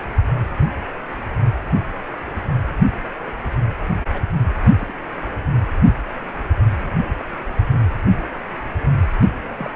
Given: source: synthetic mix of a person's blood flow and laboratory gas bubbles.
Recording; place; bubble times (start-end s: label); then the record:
Doppler ultrasound of blood flow; precordium
4.12-4.27 s: bubbles
4.78-4.95 s: bubbles
7.18-7.25 s: bubbles
9.56-9.71 s: bubbles
From the record:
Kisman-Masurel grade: 121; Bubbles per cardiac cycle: 1 to 2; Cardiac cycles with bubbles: 10 to 50%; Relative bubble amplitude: barely perceptible (0.100 to 0.250); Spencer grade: 2 (many but less than half of the cardiac periods contain bubble signals, singularly or in groups); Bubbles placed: anywhere in the cardiac cycle